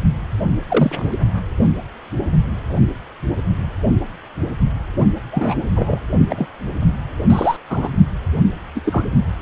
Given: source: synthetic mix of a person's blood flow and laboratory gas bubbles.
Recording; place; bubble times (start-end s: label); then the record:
Doppler ultrasound of blood flow; precordium
0.68-1.14 s: bubbles
5.32-5.62 s: bubbles
5.75-5.99 s: bubbles
6.29-6.46 s: bubbles
7.30-7.57 s: bubbles
7.70-7.88 s: bubbles
8.75-8.80 s: bubbles
8.85-9.04 s: bubbles
From the record:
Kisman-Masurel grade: 233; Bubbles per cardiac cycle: several, 3 to 8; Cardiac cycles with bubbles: 50 to 99%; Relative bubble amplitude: loud (0.450 to 0.775); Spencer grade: 3 (all of the cardiac periods contain showers or single bubble signals, but not dominating or overriding the cardiac motion signals); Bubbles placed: only in the low amplitude regions of the cardiac cycle